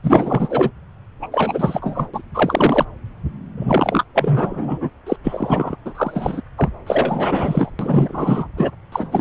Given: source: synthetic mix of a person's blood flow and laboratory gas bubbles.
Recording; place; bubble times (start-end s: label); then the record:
Doppler ultrasound of blood flow; subclavian vein
0.03-0.71 s: bubbles
1.22-1.27 s: bubbles
1.32-2.08 s: bubbles
2.13-2.21 s: bubbles
2.34-2.85 s: bubbles
3.57-4.04 s: bubbles
4.14-4.89 s: bubbles
5.06-5.16 s: bubbles
5.24-5.76 s: bubbles
5.85-6.41 s: bubbles
6.58-6.69 s: bubbles
6.87-7.70 s: bubbles
7.79-8.47 s: bubbles
8.57-8.71 s: bubbles
8.92-9.21 s: bubbles
From the record:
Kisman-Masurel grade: 343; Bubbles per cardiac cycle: rolling drumbeat, 9 or more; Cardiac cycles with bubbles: 100%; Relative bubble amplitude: loud (0.450 to 0.775); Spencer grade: 3 (all of the cardiac periods contain showers or single bubble signals, but not dominating or overriding the cardiac motion signals); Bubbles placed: anywhere in the cardiac cycle